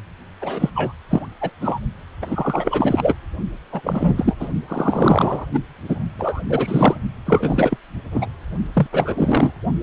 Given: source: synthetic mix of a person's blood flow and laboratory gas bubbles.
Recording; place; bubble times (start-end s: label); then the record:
Doppler ultrasound of blood flow; precordium
0.41-0.69 s: bubbles
0.75-0.93 s: bubbles
1.09-1.26 s: bubbles
1.41-1.50 s: bubbles
1.61-1.79 s: bubbles
2.21-3.15 s: bubbles
3.72-3.81 s: bubbles
3.83-4.35 s: bubbles
4.39-4.48 s: bubbles
4.68-5.46 s: bubbles
5.53-5.59 s: bubbles
5.88-5.99 s: bubbles
6.18-6.41 s: bubbles
6.50-6.99 s: bubbles
7.26-7.78 s: bubbles
8.12-8.28 s: bubbles
8.74-8.87 s: bubbles
8.92-9.52 s: bubbles
From the record:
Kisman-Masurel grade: 332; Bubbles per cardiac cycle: rolling drumbeat, 9 or more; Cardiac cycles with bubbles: 50 to 99%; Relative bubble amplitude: moderate (0.250 to 0.450); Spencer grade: 3 (all of the cardiac periods contain showers or single bubble signals, but not dominating or overriding the cardiac motion signals); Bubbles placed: only in the low amplitude regions of the cardiac cycle